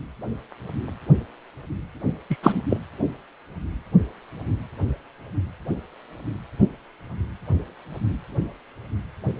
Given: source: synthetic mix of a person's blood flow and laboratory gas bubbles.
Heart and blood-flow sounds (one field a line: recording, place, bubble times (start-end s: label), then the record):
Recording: Doppler ultrasound of blood flow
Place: precordium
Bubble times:
2.29-2.37 s: bubbles
2.42-2.61 s: bubbles
2.69-2.78 s: bubbles
From the record:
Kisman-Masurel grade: 213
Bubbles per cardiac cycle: several, 3 to 8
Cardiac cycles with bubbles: 1 to 10%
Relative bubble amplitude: loud (0.450 to 0.775)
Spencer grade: 1 (occasional bubble signal discernible with the cardiac motion signal, with majority of cardiac periods free of bubbles)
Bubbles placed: anywhere in the cardiac cycle